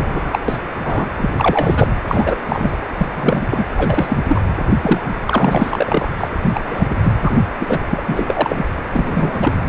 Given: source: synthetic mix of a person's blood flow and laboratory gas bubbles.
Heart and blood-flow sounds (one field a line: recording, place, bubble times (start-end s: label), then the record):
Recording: Doppler ultrasound of blood flow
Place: precordium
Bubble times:
0.00-0.39 s: bubbles
0.48-0.67 s: bubbles
0.84-1.05 s: bubbles
1.18-1.30 s: bubbles
1.37-1.88 s: bubbles
2.08-2.35 s: bubbles
2.49-2.76 s: bubbles
2.98-3.06 s: bubbles
3.15-3.46 s: bubbles
3.50-3.66 s: bubbles
3.77-4.18 s: bubbles
4.28-4.45 s: bubbles
4.83-5.01 s: bubbles
5.25-6.10 s: bubbles
6.17-6.29 s: bubbles
6.42-6.60 s: bubbles
6.67-6.96 s: bubbles
7.03-7.16 s: bubbles
7.21-7.38 s: bubbles
7.59-7.79 s: bubbles
7.89-8.03 s: bubbles
8.07-8.64 s: bubbles
8.93-9.53 s: bubbles
From the record:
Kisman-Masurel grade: 243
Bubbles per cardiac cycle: several, 3 to 8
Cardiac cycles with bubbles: 100%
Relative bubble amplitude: loud (0.450 to 0.775)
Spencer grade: 3 (all of the cardiac periods contain showers or single bubble signals, but not dominating or overriding the cardiac motion signals)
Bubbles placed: anywhere in the cardiac cycle